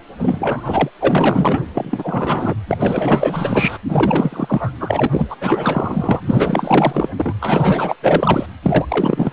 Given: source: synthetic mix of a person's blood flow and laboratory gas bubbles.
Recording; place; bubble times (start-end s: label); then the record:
Doppler ultrasound of blood flow; precordium
0.19-0.90 s: bubbles
1.00-1.64 s: bubbles
1.74-2.54 s: bubbles
2.69-3.78 s: bubbles
3.89-4.71 s: bubbles
4.79-5.07 s: bubbles
5.11-5.36 s: bubbles
5.40-6.21 s: bubbles
6.25-7.08 s: bubbles
7.17-7.34 s: bubbles
7.40-7.95 s: bubbles
8.02-8.46 s: bubbles
8.62-8.86 s: bubbles
8.90-9.33 s: bubbles
From the record:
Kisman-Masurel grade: 444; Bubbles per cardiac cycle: continuous sound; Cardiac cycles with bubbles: 100%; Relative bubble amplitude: maximal (0.775 to 0.999); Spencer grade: 4 (maximum detectable bubble signal sounding continuously throughout systole and diastole of every cardiac period, and overriding the amplitude of the normal cardiac signals); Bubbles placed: anywhere in the cardiac cycle